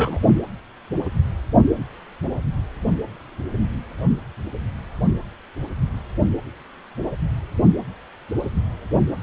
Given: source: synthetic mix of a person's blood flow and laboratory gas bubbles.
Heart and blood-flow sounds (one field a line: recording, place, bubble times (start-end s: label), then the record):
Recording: Doppler ultrasound of blood flow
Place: precordium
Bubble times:
0.00-0.20 s: bubbles
From the record:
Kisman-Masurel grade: 113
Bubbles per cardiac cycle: 1 to 2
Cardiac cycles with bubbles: 1 to 10%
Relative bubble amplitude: loud (0.450 to 0.775)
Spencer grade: 1 (occasional bubble signal discernible with the cardiac motion signal, with majority of cardiac periods free of bubbles)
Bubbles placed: only in the low amplitude regions of the cardiac cycle